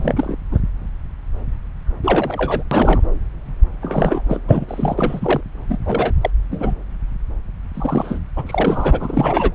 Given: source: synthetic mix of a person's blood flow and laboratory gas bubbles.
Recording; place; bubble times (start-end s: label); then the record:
Doppler ultrasound of blood flow; subclavian vein
0.00-0.35 s: bubbles
0.51-0.58 s: bubbles
2.03-2.64 s: bubbles
2.71-3.01 s: bubbles
3.81-4.21 s: bubbles
4.28-4.40 s: bubbles
4.48-4.95 s: bubbles
4.98-5.41 s: bubbles
5.69-5.78 s: bubbles
5.85-6.13 s: bubbles
6.21-6.30 s: bubbles
6.51-6.74 s: bubbles
7.74-8.20 s: bubbles
8.36-9.52 s: bubbles
From the record:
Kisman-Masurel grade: 233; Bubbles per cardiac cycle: several, 3 to 8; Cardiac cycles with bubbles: 50 to 99%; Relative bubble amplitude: loud (0.450 to 0.775); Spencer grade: 3 (all of the cardiac periods contain showers or single bubble signals, but not dominating or overriding the cardiac motion signals); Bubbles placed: anywhere in the cardiac cycle